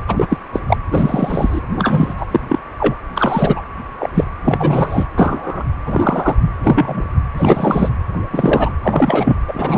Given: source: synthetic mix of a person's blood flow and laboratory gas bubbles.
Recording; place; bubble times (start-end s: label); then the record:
Doppler ultrasound of blood flow; precordium
0.08-0.27 s: bubbles
0.30-0.38 s: bubbles
0.53-0.60 s: bubbles
0.68-0.77 s: bubbles
0.91-1.60 s: bubbles
1.72-2.14 s: bubbles
2.17-2.26 s: bubbles
2.31-2.41 s: bubbles
2.49-2.59 s: bubbles
2.79-2.95 s: bubbles
3.14-3.62 s: bubbles
3.99-4.10 s: bubbles
4.13-4.24 s: bubbles
4.44-5.06 s: bubbles
5.15-5.63 s: bubbles
5.85-6.36 s: bubbles
6.41-6.49 s: bubbles
6.62-7.05 s: bubbles
7.37-7.89 s: bubbles
8.32-8.71 s: bubbles
8.83-9.37 s: bubbles
9.48-9.78 s: bubbles
From the record:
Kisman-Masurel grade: 243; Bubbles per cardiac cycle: several, 3 to 8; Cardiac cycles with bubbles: 100%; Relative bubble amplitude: loud (0.450 to 0.775); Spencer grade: 3 (all of the cardiac periods contain showers or single bubble signals, but not dominating or overriding the cardiac motion signals); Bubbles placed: anywhere in the cardiac cycle